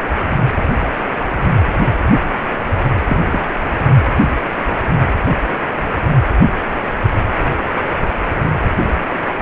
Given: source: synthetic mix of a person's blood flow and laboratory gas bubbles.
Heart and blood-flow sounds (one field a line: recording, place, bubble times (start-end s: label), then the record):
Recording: Doppler ultrasound of blood flow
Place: precordium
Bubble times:
3.07-3.18 s: bubbles
3.30-3.41 s: bubbles
From the record:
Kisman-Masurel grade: 112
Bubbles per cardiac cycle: 1 to 2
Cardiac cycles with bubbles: 1 to 10%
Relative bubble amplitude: moderate (0.250 to 0.450)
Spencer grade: 1 (occasional bubble signal discernible with the cardiac motion signal, with majority of cardiac periods free of bubbles)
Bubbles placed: anywhere in the cardiac cycle